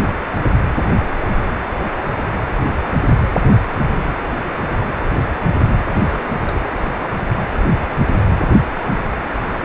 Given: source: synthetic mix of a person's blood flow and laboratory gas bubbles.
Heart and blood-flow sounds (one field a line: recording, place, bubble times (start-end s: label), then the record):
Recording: Doppler ultrasound of blood flow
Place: precordium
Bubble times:
5.86-6.21 s: bubbles
6.42-6.61 s: bubbles
From the record:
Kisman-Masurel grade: 221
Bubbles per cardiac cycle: several, 3 to 8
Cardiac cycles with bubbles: 10 to 50%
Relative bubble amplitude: barely perceptible (0.100 to 0.250)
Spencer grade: 2 (many but less than half of the cardiac periods contain bubble signals, singularly or in groups)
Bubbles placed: anywhere in the cardiac cycle